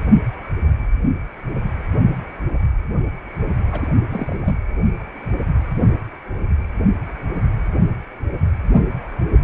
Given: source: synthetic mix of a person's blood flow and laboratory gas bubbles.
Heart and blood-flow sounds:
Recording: Doppler ultrasound of blood flow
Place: precordium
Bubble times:
3.71-3.88 s: bubbles
4.10-4.59 s: bubbles
From the record:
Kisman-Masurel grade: 211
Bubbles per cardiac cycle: several, 3 to 8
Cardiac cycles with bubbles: 1 to 10%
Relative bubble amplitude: barely perceptible (0.100 to 0.250)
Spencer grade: 1 (occasional bubble signal discernible with the cardiac motion signal, with majority of cardiac periods free of bubbles)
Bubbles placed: anywhere in the cardiac cycle

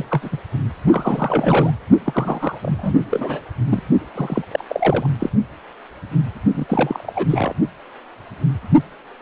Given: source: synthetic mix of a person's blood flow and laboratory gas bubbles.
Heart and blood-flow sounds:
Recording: Doppler ultrasound of blood flow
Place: precordium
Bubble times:
0.00-0.05 s: bubbles
0.10-0.38 s: bubbles
0.92-1.71 s: bubbles
2.04-2.58 s: bubbles
2.62-2.98 s: bubbles
3.10-3.41 s: bubbles
3.69-3.83 s: bubbles
4.14-4.42 s: bubbles
4.51-4.64 s: bubbles
4.68-5.08 s: bubbles
5.19-5.29 s: bubbles
6.52-6.67 s: bubbles
6.69-7.27 s: bubbles
7.30-7.53 s: bubbles
From the record:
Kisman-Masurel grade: 332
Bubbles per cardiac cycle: rolling drumbeat, 9 or more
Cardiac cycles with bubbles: 50 to 99%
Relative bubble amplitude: moderate (0.250 to 0.450)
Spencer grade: 3 (all of the cardiac periods contain showers or single bubble signals, but not dominating or overriding the cardiac motion signals)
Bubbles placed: only in the low amplitude regions of the cardiac cycle

